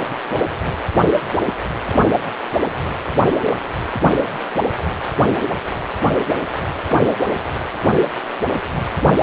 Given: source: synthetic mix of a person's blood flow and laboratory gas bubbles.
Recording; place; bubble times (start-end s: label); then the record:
Doppler ultrasound of blood flow; precordium
no bubbles
From the record:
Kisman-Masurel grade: 000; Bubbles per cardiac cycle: 0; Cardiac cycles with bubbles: 0%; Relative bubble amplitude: no bubbles discernible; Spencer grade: 0 (complete lack of bubble signals)